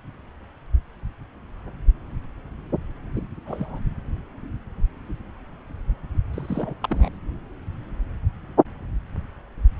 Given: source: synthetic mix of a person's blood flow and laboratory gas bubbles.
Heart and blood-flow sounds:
Doppler ultrasound of blood flow; subclavian vein
3.14-3.21 s: bubbles
3.45-3.80 s: bubbles
6.33-6.75 s: bubbles
6.83-7.12 s: bubbles
From the record:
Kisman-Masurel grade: 221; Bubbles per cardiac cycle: several, 3 to 8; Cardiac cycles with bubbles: 10 to 50%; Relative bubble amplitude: barely perceptible (0.100 to 0.250); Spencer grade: 2 (many but less than half of the cardiac periods contain bubble signals, singularly or in groups); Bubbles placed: anywhere in the cardiac cycle

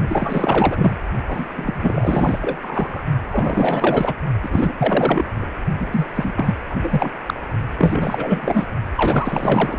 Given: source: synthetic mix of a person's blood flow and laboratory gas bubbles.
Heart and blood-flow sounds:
Doppler ultrasound of blood flow; precordium
0.08-0.98 s: bubbles
1.28-1.47 s: bubbles
1.55-3.03 s: bubbles
3.30-4.14 s: bubbles
4.42-4.74 s: bubbles
4.78-5.46 s: bubbles
5.79-5.87 s: bubbles
5.92-6.07 s: bubbles
6.15-6.54 s: bubbles
6.70-6.75 s: bubbles
6.82-7.11 s: bubbles
7.26-7.34 s: bubbles
7.78-8.67 s: bubbles
8.95-9.78 s: bubbles
From the record:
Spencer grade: 4 (maximum detectable bubble signal sounding continuously throughout systole and diastole of every cardiac period, and overriding the amplitude of the normal cardiac signals); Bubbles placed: only in the low amplitude regions of the cardiac cycle

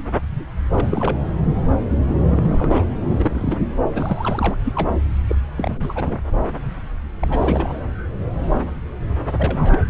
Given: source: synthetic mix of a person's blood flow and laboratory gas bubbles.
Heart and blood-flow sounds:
Doppler ultrasound of blood flow; subclavian vein
0.72-1.17 s: bubbles
2.31-2.85 s: bubbles
3.04-3.58 s: bubbles
3.94-4.55 s: bubbles
4.60-4.90 s: bubbles
5.28-5.36 s: bubbles
5.56-6.16 s: bubbles
7.20-7.77 s: bubbles
9.38-9.80 s: bubbles
9.86-9.90 s: bubbles
From the record:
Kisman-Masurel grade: 232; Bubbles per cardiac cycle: several, 3 to 8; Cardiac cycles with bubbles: 50 to 99%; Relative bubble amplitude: moderate (0.250 to 0.450); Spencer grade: 3 (all of the cardiac periods contain showers or single bubble signals, but not dominating or overriding the cardiac motion signals); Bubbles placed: anywhere in the cardiac cycle

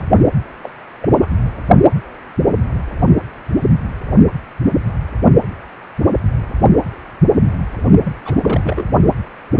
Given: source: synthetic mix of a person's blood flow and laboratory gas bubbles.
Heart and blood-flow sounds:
Doppler ultrasound of blood flow; precordium
0.00-0.02 s: bubbles
0.63-0.69 s: bubbles
1.02-1.09 s: bubbles
1.21-1.30 s: bubbles
8.04-8.16 s: bubbles
8.25-8.36 s: bubbles
8.38-8.92 s: bubbles
From the record:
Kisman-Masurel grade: 221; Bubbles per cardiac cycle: several, 3 to 8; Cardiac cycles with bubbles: 10 to 50%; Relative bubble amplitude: barely perceptible (0.100 to 0.250); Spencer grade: 2 (many but less than half of the cardiac periods contain bubble signals, singularly or in groups); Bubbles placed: only in the low amplitude regions of the cardiac cycle

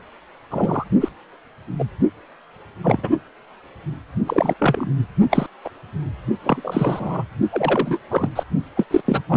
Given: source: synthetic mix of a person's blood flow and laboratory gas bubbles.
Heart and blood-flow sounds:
Doppler ultrasound of blood flow; precordium
0.51-0.84 s: bubbles
1.00-1.09 s: bubbles
1.79-1.85 s: bubbles
2.83-3.09 s: bubbles
4.26-4.54 s: bubbles
4.59-4.90 s: bubbles
5.31-5.47 s: bubbles
5.65-5.69 s: bubbles
6.44-7.24 s: bubbles
7.51-7.99 s: bubbles
8.10-8.29 s: bubbles
8.35-8.43 s: bubbles
8.76-8.84 s: bubbles
8.90-9.00 s: bubbles
9.06-9.22 s: bubbles
9.29-9.37 s: bubbles
From the record:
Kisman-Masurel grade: 243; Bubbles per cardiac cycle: several, 3 to 8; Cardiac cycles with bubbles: 100%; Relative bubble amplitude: loud (0.450 to 0.775); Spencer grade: 3 (all of the cardiac periods contain showers or single bubble signals, but not dominating or overriding the cardiac motion signals); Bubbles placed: only in the low amplitude regions of the cardiac cycle

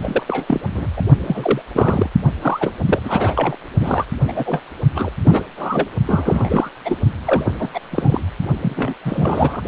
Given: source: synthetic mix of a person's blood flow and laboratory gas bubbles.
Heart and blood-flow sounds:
Doppler ultrasound of blood flow; precordium
0.02-0.24 s: bubbles
0.28-0.45 s: bubbles
0.47-0.60 s: bubbles
0.74-0.88 s: bubbles
0.96-1.02 s: bubbles
1.26-1.61 s: bubbles
1.73-2.09 s: bubbles
2.42-2.73 s: bubbles
2.85-3.00 s: bubbles
3.04-3.57 s: bubbles
3.80-4.05 s: bubbles
4.28-4.61 s: bubbles
4.93-5.10 s: bubbles
5.25-5.42 s: bubbles
5.57-5.88 s: bubbles
6.06-6.70 s: bubbles
6.84-6.97 s: bubbles
7.25-7.52 s: bubbles
7.58-7.69 s: bubbles
7.73-7.80 s: bubbles
7.91-8.21 s: bubbles
8.62-8.94 s: bubbles
9.05-9.62 s: bubbles
From the record:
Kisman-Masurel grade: 342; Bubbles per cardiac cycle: rolling drumbeat, 9 or more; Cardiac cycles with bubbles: 100%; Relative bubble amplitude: moderate (0.250 to 0.450); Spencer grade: 3 (all of the cardiac periods contain showers or single bubble signals, but not dominating or overriding the cardiac motion signals); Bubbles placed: only in the low amplitude regions of the cardiac cycle

